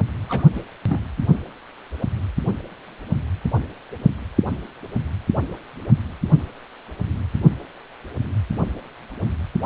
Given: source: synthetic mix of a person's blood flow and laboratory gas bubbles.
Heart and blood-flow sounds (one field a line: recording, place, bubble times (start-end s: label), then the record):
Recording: Doppler ultrasound of blood flow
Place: precordium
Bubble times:
0.29-0.43 s: bubbles
0.53-0.61 s: bubbles
0.89-0.99 s: bubbles
From the record:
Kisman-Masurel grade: 211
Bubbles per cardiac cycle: several, 3 to 8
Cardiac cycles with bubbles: 1 to 10%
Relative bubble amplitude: barely perceptible (0.100 to 0.250)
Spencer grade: 1 (occasional bubble signal discernible with the cardiac motion signal, with majority of cardiac periods free of bubbles)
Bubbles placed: anywhere in the cardiac cycle